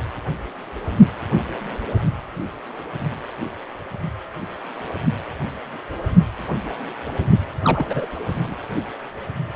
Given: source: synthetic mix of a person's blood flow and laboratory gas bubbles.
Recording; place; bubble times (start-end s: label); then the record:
Doppler ultrasound of blood flow; precordium
7.62-8.08 s: bubbles
8.44-8.55 s: bubbles
From the record:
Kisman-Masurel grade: 212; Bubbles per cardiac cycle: several, 3 to 8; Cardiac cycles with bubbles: 1 to 10%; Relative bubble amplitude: moderate (0.250 to 0.450); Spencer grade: 1 (occasional bubble signal discernible with the cardiac motion signal, with majority of cardiac periods free of bubbles); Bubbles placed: only in the low amplitude regions of the cardiac cycle